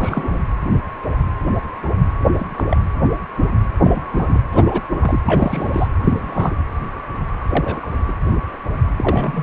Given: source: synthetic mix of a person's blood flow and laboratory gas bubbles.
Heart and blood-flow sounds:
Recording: Doppler ultrasound of blood flow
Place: precordium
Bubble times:
0.00-0.38 s: bubbles
2.37-2.63 s: bubbles
2.69-2.77 s: bubbles
3.84-4.00 s: bubbles
4.12-4.42 s: bubbles
4.52-4.82 s: bubbles
5.02-5.20 s: bubbles
5.25-5.89 s: bubbles
6.04-6.56 s: bubbles
7.49-7.91 s: bubbles
8.08-8.13 s: bubbles
8.96-9.43 s: bubbles
From the record:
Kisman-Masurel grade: 232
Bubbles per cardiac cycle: several, 3 to 8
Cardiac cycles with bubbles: 50 to 99%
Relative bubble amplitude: moderate (0.250 to 0.450)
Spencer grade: 3 (all of the cardiac periods contain showers or single bubble signals, but not dominating or overriding the cardiac motion signals)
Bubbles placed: anywhere in the cardiac cycle

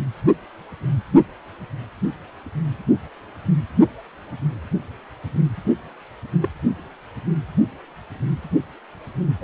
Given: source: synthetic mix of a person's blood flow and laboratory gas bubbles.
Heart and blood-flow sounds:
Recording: Doppler ultrasound of blood flow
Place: precordium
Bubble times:
6.42-6.49 s: bubbles
9.41-9.44 s: bubbles
From the record:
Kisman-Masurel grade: 122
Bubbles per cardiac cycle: 1 to 2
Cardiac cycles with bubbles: 10 to 50%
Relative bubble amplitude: moderate (0.250 to 0.450)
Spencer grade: 2 (many but less than half of the cardiac periods contain bubble signals, singularly or in groups)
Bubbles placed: anywhere in the cardiac cycle

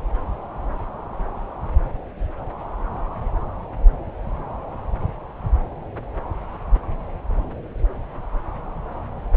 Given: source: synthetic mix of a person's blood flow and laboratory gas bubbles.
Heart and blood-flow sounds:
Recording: Doppler ultrasound of blood flow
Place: subclavian vein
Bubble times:
no bubbles
From the record:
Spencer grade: 0 (complete lack of bubble signals)

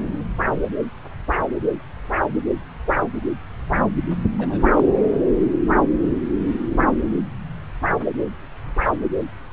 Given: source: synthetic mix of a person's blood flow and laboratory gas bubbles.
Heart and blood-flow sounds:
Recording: Doppler ultrasound of blood flow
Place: subclavian vein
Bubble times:
4.38-4.58 s: bubbles
4.74-4.83 s: bubbles
From the record:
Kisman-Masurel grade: 111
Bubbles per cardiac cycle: 1 to 2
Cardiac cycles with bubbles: 1 to 10%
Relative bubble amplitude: barely perceptible (0.100 to 0.250)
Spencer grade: 1 (occasional bubble signal discernible with the cardiac motion signal, with majority of cardiac periods free of bubbles)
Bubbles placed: anywhere in the cardiac cycle

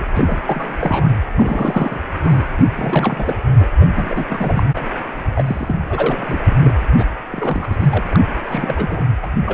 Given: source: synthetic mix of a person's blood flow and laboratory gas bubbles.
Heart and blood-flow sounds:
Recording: Doppler ultrasound of blood flow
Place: precordium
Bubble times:
0.00-0.04 s: bubbles
0.12-0.38 s: bubbles
0.47-0.76 s: bubbles
0.79-1.16 s: bubbles
1.35-1.99 s: bubbles
2.21-2.46 s: bubbles
2.56-2.66 s: bubbles
2.75-3.37 s: bubbles
3.59-3.68 s: bubbles
3.79-3.86 s: bubbles
3.95-4.25 s: bubbles
4.29-4.63 s: bubbles
4.75-4.89 s: bubbles
5.35-5.79 s: bubbles
5.89-6.75 s: bubbles
6.97-7.04 s: bubbles
7.32-7.76 s: bubbles
7.79-7.88 s: bubbles
7.91-8.04 s: bubbles
8.11-8.20 s: bubbles
8.44-9.07 s: bubbles
9.22-9.26 s: bubbles
9.46-9.54 s: bubbles
From the record:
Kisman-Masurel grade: 342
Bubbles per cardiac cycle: rolling drumbeat, 9 or more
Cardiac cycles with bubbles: 100%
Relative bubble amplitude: moderate (0.250 to 0.450)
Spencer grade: 3 (all of the cardiac periods contain showers or single bubble signals, but not dominating or overriding the cardiac motion signals)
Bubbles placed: anywhere in the cardiac cycle

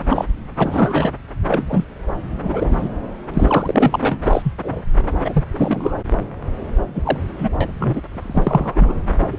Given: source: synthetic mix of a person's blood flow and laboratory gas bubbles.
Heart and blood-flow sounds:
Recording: Doppler ultrasound of blood flow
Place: subclavian vein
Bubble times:
0.09-0.25 s: bubbles
0.56-1.11 s: bubbles
1.48-1.85 s: bubbles
2.43-2.89 s: bubbles
3.33-4.18 s: bubbles
4.23-4.54 s: bubbles
4.63-4.83 s: bubbles
5.24-5.44 s: bubbles
5.53-5.98 s: bubbles
6.95-7.17 s: bubbles
7.38-7.50 s: bubbles
7.61-7.72 s: bubbles
7.78-8.01 s: bubbles
8.11-8.93 s: bubbles
9.21-9.27 s: bubbles
9.31-9.38 s: bubbles
From the record:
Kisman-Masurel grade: 242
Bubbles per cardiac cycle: several, 3 to 8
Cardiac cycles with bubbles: 100%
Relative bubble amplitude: moderate (0.250 to 0.450)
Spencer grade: 3 (all of the cardiac periods contain showers or single bubble signals, but not dominating or overriding the cardiac motion signals)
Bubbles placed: anywhere in the cardiac cycle

